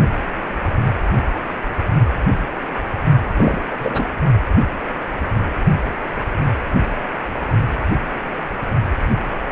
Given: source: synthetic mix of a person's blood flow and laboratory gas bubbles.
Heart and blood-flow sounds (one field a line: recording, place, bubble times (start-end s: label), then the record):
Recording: Doppler ultrasound of blood flow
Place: precordium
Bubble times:
3.36-3.62 s: bubbles
3.71-4.06 s: bubbles
From the record:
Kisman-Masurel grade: 223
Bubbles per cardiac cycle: several, 3 to 8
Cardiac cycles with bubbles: 10 to 50%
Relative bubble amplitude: loud (0.450 to 0.775)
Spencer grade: 2 (many but less than half of the cardiac periods contain bubble signals, singularly or in groups)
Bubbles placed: only in the low amplitude regions of the cardiac cycle